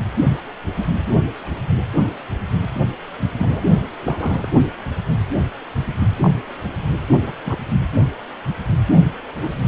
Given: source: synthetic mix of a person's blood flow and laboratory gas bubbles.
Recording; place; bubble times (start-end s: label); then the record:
Doppler ultrasound of blood flow; precordium
3.38-3.65 s: bubbles
4.03-4.52 s: bubbles
6.21-6.30 s: bubbles
7.26-7.33 s: bubbles
7.45-7.58 s: bubbles
9.41-9.50 s: bubbles
From the record:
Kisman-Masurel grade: 122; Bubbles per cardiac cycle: 1 to 2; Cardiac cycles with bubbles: 10 to 50%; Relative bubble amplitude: moderate (0.250 to 0.450); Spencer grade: 2 (many but less than half of the cardiac periods contain bubble signals, singularly or in groups); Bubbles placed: only in the low amplitude regions of the cardiac cycle